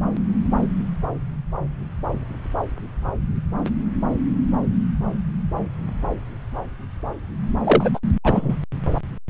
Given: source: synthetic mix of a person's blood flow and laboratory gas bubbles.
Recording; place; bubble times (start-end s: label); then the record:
Doppler ultrasound of blood flow; subclavian vein
7.63-7.90 s: bubbles
7.94-7.99 s: bubbles
8.23-8.56 s: bubbles
From the record:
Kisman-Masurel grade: 223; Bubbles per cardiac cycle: several, 3 to 8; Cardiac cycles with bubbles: 10 to 50%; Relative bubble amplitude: loud (0.450 to 0.775); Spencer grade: 2 (many but less than half of the cardiac periods contain bubble signals, singularly or in groups); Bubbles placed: anywhere in the cardiac cycle